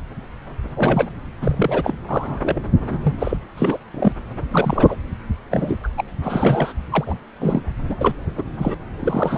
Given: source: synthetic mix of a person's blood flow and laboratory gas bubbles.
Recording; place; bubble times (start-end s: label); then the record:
Doppler ultrasound of blood flow; subclavian vein
0.77-1.09 s: bubbles
1.42-1.97 s: bubbles
2.08-2.39 s: bubbles
2.42-2.60 s: bubbles
2.89-2.99 s: bubbles
3.03-3.14 s: bubbles
3.19-3.38 s: bubbles
3.57-3.77 s: bubbles
3.94-4.12 s: bubbles
4.52-4.96 s: bubbles
5.51-5.78 s: bubbles
5.83-5.88 s: bubbles
5.97-6.04 s: bubbles
6.23-6.72 s: bubbles
6.90-7.14 s: bubbles
7.40-7.62 s: bubbles
7.89-8.21 s: bubbles
8.37-8.44 s: bubbles
8.58-8.74 s: bubbles
9.00-9.38 s: bubbles
From the record:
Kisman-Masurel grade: 232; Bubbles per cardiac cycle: several, 3 to 8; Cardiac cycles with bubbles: 50 to 99%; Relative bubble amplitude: moderate (0.250 to 0.450); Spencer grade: 3 (all of the cardiac periods contain showers or single bubble signals, but not dominating or overriding the cardiac motion signals); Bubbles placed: anywhere in the cardiac cycle